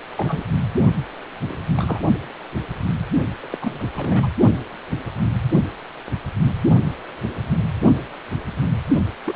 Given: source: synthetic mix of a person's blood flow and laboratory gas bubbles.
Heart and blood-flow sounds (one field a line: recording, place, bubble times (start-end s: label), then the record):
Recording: Doppler ultrasound of blood flow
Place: precordium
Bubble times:
0.17-0.44 s: bubbles
1.48-1.61 s: bubbles
1.74-1.99 s: bubbles
3.42-3.47 s: bubbles
3.51-3.58 s: bubbles
3.61-3.84 s: bubbles
3.92-4.27 s: bubbles
9.25-9.36 s: bubbles
From the record:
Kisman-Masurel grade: 221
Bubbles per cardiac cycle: several, 3 to 8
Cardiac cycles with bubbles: 10 to 50%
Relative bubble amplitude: barely perceptible (0.100 to 0.250)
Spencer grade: 2 (many but less than half of the cardiac periods contain bubble signals, singularly or in groups)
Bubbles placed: only in the low amplitude regions of the cardiac cycle